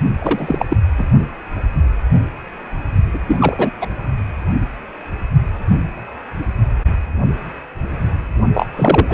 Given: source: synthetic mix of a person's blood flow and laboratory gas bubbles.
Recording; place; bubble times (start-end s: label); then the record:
Doppler ultrasound of blood flow; precordium
0.19-0.65 s: bubbles
0.69-0.77 s: bubbles
0.98-1.05 s: bubbles
3.14-3.19 s: bubbles
3.27-3.71 s: bubbles
3.81-3.88 s: bubbles
8.54-8.66 s: bubbles
8.76-9.14 s: bubbles
From the record:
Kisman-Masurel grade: 223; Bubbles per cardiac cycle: several, 3 to 8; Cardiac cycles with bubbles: 10 to 50%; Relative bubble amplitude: loud (0.450 to 0.775); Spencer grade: 2 (many but less than half of the cardiac periods contain bubble signals, singularly or in groups); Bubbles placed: only in the low amplitude regions of the cardiac cycle